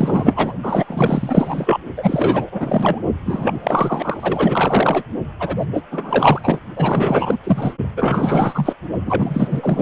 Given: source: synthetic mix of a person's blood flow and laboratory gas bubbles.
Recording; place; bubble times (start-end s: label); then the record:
Doppler ultrasound of blood flow; precordium
0.00-0.53 s: bubbles
0.62-1.80 s: bubbles
1.95-3.02 s: bubbles
3.25-5.03 s: bubbles
5.39-5.66 s: bubbles
5.73-5.82 s: bubbles
5.91-6.59 s: bubbles
6.75-7.37 s: bubbles
7.43-7.74 s: bubbles
7.97-8.73 s: bubbles
9.05-9.82 s: bubbles
From the record:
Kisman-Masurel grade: 444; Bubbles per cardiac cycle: continuous sound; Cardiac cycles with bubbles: 100%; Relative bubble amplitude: maximal (0.775 to 0.999); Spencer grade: 4 (maximum detectable bubble signal sounding continuously throughout systole and diastole of every cardiac period, and overriding the amplitude of the normal cardiac signals); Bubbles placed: only in the low amplitude regions of the cardiac cycle